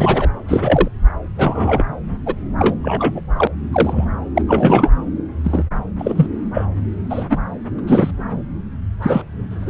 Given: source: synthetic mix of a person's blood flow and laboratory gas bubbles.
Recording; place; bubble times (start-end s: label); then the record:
Doppler ultrasound of blood flow; subclavian vein
0.00-0.31 s: bubbles
0.48-0.88 s: bubbles
1.38-1.84 s: bubbles
2.25-2.35 s: bubbles
2.58-2.75 s: bubbles
2.81-3.21 s: bubbles
3.37-3.48 s: bubbles
3.73-4.04 s: bubbles
4.35-4.42 s: bubbles
4.46-4.90 s: bubbles
5.43-5.63 s: bubbles
5.98-6.26 s: bubbles
6.53-6.66 s: bubbles
7.09-7.25 s: bubbles
7.29-7.38 s: bubbles
7.78-7.81 s: bubbles
7.87-8.11 s: bubbles
9.02-9.22 s: bubbles
9.50-9.69 s: bubbles
From the record:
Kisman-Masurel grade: 233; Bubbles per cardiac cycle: several, 3 to 8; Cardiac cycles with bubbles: 50 to 99%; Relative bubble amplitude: loud (0.450 to 0.775); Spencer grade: 3 (all of the cardiac periods contain showers or single bubble signals, but not dominating or overriding the cardiac motion signals); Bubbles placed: anywhere in the cardiac cycle